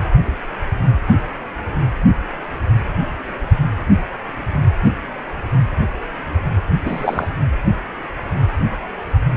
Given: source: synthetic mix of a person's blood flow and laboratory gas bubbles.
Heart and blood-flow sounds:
Doppler ultrasound of blood flow; precordium
6.85-7.28 s: bubbles
From the record:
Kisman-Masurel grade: 113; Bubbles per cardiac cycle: 1 to 2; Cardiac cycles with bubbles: 1 to 10%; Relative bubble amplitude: loud (0.450 to 0.775); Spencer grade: 1 (occasional bubble signal discernible with the cardiac motion signal, with majority of cardiac periods free of bubbles); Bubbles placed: only in the low amplitude regions of the cardiac cycle

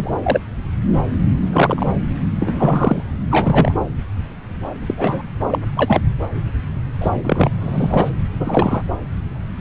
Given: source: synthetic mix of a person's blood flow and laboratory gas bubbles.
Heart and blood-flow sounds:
Doppler ultrasound of blood flow; subclavian vein
0.00-0.20 s: bubbles
0.23-0.40 s: bubbles
1.51-1.86 s: bubbles
2.39-3.03 s: bubbles
3.29-3.74 s: bubbles
4.81-5.22 s: bubbles
5.47-5.59 s: bubbles
5.76-6.03 s: bubbles
7.00-7.10 s: bubbles
7.23-7.50 s: bubbles
7.60-8.10 s: bubbles
8.40-8.82 s: bubbles
From the record:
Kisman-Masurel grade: 233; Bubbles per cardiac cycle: several, 3 to 8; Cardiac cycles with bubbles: 50 to 99%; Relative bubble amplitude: loud (0.450 to 0.775); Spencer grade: 3 (all of the cardiac periods contain showers or single bubble signals, but not dominating or overriding the cardiac motion signals); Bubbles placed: anywhere in the cardiac cycle

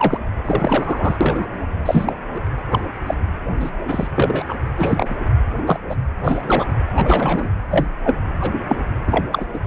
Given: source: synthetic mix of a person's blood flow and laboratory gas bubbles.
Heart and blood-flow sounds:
Doppler ultrasound of blood flow; precordium
0.00-0.20 s: bubbles
0.45-1.18 s: bubbles
1.20-1.47 s: bubbles
1.85-2.13 s: bubbles
2.34-2.41 s: bubbles
2.71-2.79 s: bubbles
3.06-3.15 s: bubbles
3.59-3.71 s: bubbles
3.88-4.07 s: bubbles
4.15-4.44 s: bubbles
4.48-4.55 s: bubbles
4.77-5.15 s: bubbles
5.57-5.80 s: bubbles
5.89-5.96 s: bubbles
6.21-6.67 s: bubbles
6.95-7.49 s: bubbles
7.71-7.86 s: bubbles
8.04-8.18 s: bubbles
8.39-8.53 s: bubbles
8.68-8.76 s: bubbles
9.07-9.25 s: bubbles
9.31-9.46 s: bubbles
9.53-9.59 s: bubbles
From the record:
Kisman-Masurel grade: 243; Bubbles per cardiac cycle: several, 3 to 8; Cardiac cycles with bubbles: 100%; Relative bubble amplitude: loud (0.450 to 0.775); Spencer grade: 3 (all of the cardiac periods contain showers or single bubble signals, but not dominating or overriding the cardiac motion signals); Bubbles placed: anywhere in the cardiac cycle

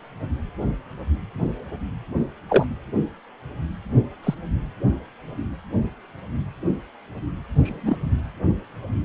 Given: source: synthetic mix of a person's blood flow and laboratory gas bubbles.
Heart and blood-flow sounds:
Doppler ultrasound of blood flow; precordium
2.48-2.67 s: bubbles
4.24-4.34 s: bubbles
7.63-7.97 s: bubbles
From the record:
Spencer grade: 2 (many but less than half of the cardiac periods contain bubble signals, singularly or in groups); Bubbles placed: anywhere in the cardiac cycle

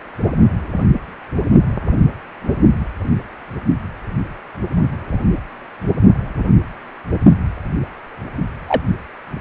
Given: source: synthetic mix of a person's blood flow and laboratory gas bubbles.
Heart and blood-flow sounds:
Doppler ultrasound of blood flow; precordium
8.68-8.82 s: bubbles
From the record:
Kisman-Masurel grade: 123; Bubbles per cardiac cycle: 1 to 2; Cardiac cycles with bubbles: 10 to 50%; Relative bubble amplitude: loud (0.450 to 0.775); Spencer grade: 2 (many but less than half of the cardiac periods contain bubble signals, singularly or in groups); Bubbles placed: only in the low amplitude regions of the cardiac cycle

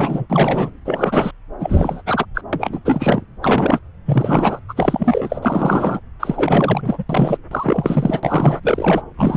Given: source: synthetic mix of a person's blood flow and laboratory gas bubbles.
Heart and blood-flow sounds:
Doppler ultrasound of blood flow; subclavian vein
0.00-0.26 s: bubbles
0.29-0.71 s: bubbles
0.85-1.31 s: bubbles
1.59-2.02 s: bubbles
2.06-2.25 s: bubbles
2.34-2.41 s: bubbles
2.52-2.80 s: bubbles
2.84-3.25 s: bubbles
3.42-3.79 s: bubbles
4.05-4.59 s: bubbles
4.68-5.39 s: bubbles
5.42-6.00 s: bubbles
6.20-7.04 s: bubbles
7.09-7.37 s: bubbles
7.51-8.60 s: bubbles
8.62-9.04 s: bubbles
9.17-9.37 s: bubbles
From the record:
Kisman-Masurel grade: 343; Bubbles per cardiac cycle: rolling drumbeat, 9 or more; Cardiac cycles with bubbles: 100%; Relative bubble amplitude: loud (0.450 to 0.775); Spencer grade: 3 (all of the cardiac periods contain showers or single bubble signals, but not dominating or overriding the cardiac motion signals); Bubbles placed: anywhere in the cardiac cycle

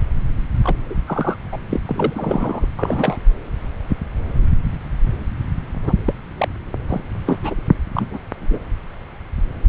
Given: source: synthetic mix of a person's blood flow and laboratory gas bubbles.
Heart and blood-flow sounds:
Doppler ultrasound of blood flow; subclavian vein
0.63-0.77 s: bubbles
0.89-0.94 s: bubbles
1.06-1.36 s: bubbles
1.52-1.57 s: bubbles
1.71-1.81 s: bubbles
1.85-2.67 s: bubbles
2.78-3.17 s: bubbles
5.83-5.93 s: bubbles
6.06-6.13 s: bubbles
6.38-6.48 s: bubbles
6.88-7.02 s: bubbles
7.25-7.38 s: bubbles
7.42-7.55 s: bubbles
7.94-8.19 s: bubbles
8.41-8.59 s: bubbles
From the record:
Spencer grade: 3 (all of the cardiac periods contain showers or single bubble signals, but not dominating or overriding the cardiac motion signals); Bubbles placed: anywhere in the cardiac cycle

